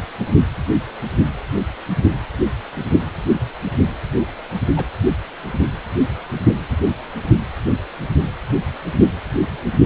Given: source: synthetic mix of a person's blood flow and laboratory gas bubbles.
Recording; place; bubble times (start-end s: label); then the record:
Doppler ultrasound of blood flow; precordium
4.76-4.85 s: bubbles
From the record:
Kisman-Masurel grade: 111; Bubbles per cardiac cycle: 1 to 2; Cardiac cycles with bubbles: 1 to 10%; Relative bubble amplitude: barely perceptible (0.100 to 0.250); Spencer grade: 1 (occasional bubble signal discernible with the cardiac motion signal, with majority of cardiac periods free of bubbles); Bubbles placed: anywhere in the cardiac cycle